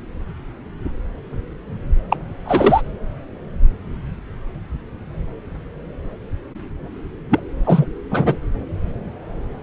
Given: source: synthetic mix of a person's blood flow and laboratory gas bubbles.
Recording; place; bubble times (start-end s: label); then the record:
Doppler ultrasound of blood flow; subclavian vein
2.10-2.17 s: bubbles
2.45-2.81 s: bubbles
7.29-7.40 s: bubbles
7.65-7.86 s: bubbles
8.10-8.36 s: bubbles
From the record:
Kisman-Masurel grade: 223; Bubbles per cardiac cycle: several, 3 to 8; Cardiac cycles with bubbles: 10 to 50%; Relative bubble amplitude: loud (0.450 to 0.775); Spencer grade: 2 (many but less than half of the cardiac periods contain bubble signals, singularly or in groups); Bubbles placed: anywhere in the cardiac cycle